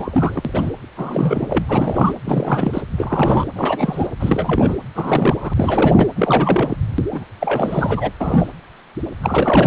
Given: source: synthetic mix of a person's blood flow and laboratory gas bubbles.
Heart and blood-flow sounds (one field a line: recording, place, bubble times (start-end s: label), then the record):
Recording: Doppler ultrasound of blood flow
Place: precordium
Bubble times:
0.00-0.42 s: bubbles
0.45-0.72 s: bubbles
0.96-1.64 s: bubbles
1.68-2.14 s: bubbles
2.25-2.82 s: bubbles
2.98-3.47 s: bubbles
3.56-4.07 s: bubbles
4.20-4.76 s: bubbles
4.95-5.54 s: bubbles
5.57-6.08 s: bubbles
6.16-6.76 s: bubbles
7.12-7.25 s: bubbles
7.41-8.11 s: bubbles
8.21-8.52 s: bubbles
9.21-9.67 s: bubbles
From the record:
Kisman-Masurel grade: 332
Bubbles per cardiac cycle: rolling drumbeat, 9 or more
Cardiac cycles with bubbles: 50 to 99%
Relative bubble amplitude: moderate (0.250 to 0.450)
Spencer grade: 3 (all of the cardiac periods contain showers or single bubble signals, but not dominating or overriding the cardiac motion signals)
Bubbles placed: anywhere in the cardiac cycle